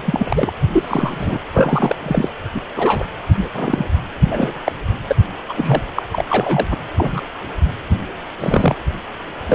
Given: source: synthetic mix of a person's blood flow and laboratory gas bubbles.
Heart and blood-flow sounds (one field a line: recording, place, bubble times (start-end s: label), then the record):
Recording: Doppler ultrasound of blood flow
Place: precordium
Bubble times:
0.00-0.51 s: bubbles
0.73-1.39 s: bubbles
1.53-1.96 s: bubbles
2.02-2.30 s: bubbles
2.51-2.60 s: bubbles
2.75-3.06 s: bubbles
3.28-3.49 s: bubbles
3.54-3.86 s: bubbles
4.24-4.63 s: bubbles
4.66-4.72 s: bubbles
5.07-5.16 s: bubbles
5.48-5.82 s: bubbles
5.95-6.02 s: bubbles
6.12-6.25 s: bubbles
6.29-6.67 s: bubbles
6.71-6.76 s: bubbles
6.96-7.21 s: bubbles
8.40-8.76 s: bubbles
9.46-9.55 s: bubbles
From the record:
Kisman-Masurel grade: 243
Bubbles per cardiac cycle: several, 3 to 8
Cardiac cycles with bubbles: 100%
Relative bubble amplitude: loud (0.450 to 0.775)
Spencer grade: 3 (all of the cardiac periods contain showers or single bubble signals, but not dominating or overriding the cardiac motion signals)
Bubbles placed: anywhere in the cardiac cycle